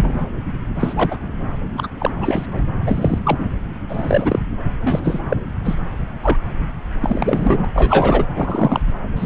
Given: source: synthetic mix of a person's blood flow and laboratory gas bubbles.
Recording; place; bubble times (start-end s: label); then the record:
Doppler ultrasound of blood flow; subclavian vein
0.00-0.27 s: bubbles
0.79-1.17 s: bubbles
1.77-1.88 s: bubbles
1.99-2.11 s: bubbles
2.16-2.66 s: bubbles
2.86-3.18 s: bubbles
3.25-3.45 s: bubbles
3.88-4.39 s: bubbles
4.81-5.20 s: bubbles
5.29-5.37 s: bubbles
5.64-5.77 s: bubbles
6.22-6.38 s: bubbles
7.00-7.65 s: bubbles
7.73-8.25 s: bubbles
8.36-8.81 s: bubbles
9.15-9.25 s: bubbles
From the record:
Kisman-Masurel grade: 243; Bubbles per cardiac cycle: several, 3 to 8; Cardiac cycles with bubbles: 100%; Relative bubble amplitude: loud (0.450 to 0.775); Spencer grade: 3 (all of the cardiac periods contain showers or single bubble signals, but not dominating or overriding the cardiac motion signals); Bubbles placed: anywhere in the cardiac cycle